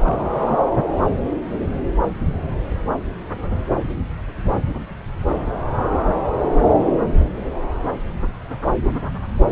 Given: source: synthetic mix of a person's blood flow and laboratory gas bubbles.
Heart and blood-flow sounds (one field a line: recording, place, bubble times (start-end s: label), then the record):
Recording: Doppler ultrasound of blood flow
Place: subclavian vein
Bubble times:
0.00-0.66 s: bubbles
From the record:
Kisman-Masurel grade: 221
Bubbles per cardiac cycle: several, 3 to 8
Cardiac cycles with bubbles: 10 to 50%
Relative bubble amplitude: barely perceptible (0.100 to 0.250)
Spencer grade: 2 (many but less than half of the cardiac periods contain bubble signals, singularly or in groups)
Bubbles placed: anywhere in the cardiac cycle